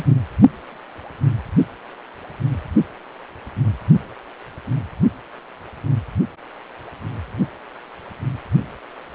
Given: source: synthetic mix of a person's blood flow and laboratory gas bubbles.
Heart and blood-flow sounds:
Doppler ultrasound of blood flow; precordium
0.00-0.04 s: bubbles
From the record:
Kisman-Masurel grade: 222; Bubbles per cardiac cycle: several, 3 to 8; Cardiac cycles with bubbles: 10 to 50%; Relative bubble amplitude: moderate (0.250 to 0.450); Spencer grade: 2 (many but less than half of the cardiac periods contain bubble signals, singularly or in groups); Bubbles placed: only in the low amplitude regions of the cardiac cycle

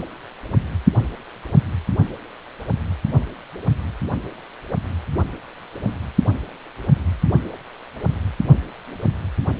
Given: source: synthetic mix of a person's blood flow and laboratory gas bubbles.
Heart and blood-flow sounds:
Doppler ultrasound of blood flow; precordium
no bubbles
From the record:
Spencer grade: 0 (complete lack of bubble signals)

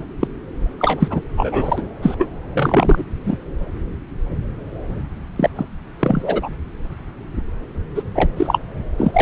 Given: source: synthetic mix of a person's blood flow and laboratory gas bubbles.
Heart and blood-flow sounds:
Doppler ultrasound of blood flow; subclavian vein
0.20-0.28 s: bubbles
0.79-1.21 s: bubbles
1.37-1.88 s: bubbles
2.02-2.15 s: bubbles
2.18-2.29 s: bubbles
2.54-3.03 s: bubbles
3.24-3.37 s: bubbles
5.36-5.50 s: bubbles
5.56-5.66 s: bubbles
6.00-6.49 s: bubbles
7.95-8.03 s: bubbles
8.15-8.30 s: bubbles
8.37-8.60 s: bubbles
8.97-9.22 s: bubbles
From the record:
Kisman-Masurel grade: 233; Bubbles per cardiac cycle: several, 3 to 8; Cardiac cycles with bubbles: 50 to 99%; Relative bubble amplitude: loud (0.450 to 0.775); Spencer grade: 3 (all of the cardiac periods contain showers or single bubble signals, but not dominating or overriding the cardiac motion signals); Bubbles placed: anywhere in the cardiac cycle

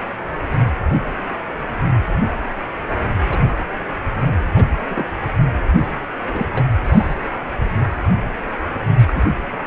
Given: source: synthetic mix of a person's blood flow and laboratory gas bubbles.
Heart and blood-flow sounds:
Doppler ultrasound of blood flow; precordium
3.29-3.38 s: bubbles
4.55-4.64 s: bubbles
4.89-5.05 s: bubbles
6.33-6.46 s: bubbles
6.57-6.67 s: bubbles
6.83-7.15 s: bubbles
8.98-9.21 s: bubbles
From the record:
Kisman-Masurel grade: 122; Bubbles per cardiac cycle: 1 to 2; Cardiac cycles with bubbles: 10 to 50%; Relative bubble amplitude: moderate (0.250 to 0.450); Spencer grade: 2 (many but less than half of the cardiac periods contain bubble signals, singularly or in groups); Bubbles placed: anywhere in the cardiac cycle

